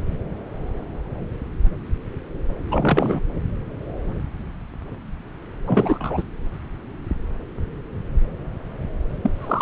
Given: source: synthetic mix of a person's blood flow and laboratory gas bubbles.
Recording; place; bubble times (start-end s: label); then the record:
Doppler ultrasound of blood flow; subclavian vein
2.71-3.20 s: bubbles
5.67-6.23 s: bubbles
9.22-9.30 s: bubbles
9.38-9.62 s: bubbles
From the record:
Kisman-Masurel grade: 223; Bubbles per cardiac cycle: several, 3 to 8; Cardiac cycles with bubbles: 10 to 50%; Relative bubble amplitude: loud (0.450 to 0.775); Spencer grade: 2 (many but less than half of the cardiac periods contain bubble signals, singularly or in groups); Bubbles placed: anywhere in the cardiac cycle